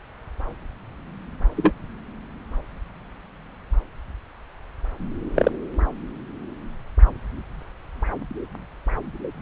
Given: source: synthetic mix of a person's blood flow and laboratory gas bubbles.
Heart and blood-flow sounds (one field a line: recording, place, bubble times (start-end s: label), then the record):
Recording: Doppler ultrasound of blood flow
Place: subclavian vein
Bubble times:
1.56-1.72 s: bubbles
5.35-5.50 s: bubbles
From the record:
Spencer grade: 2 (many but less than half of the cardiac periods contain bubble signals, singularly or in groups)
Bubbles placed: anywhere in the cardiac cycle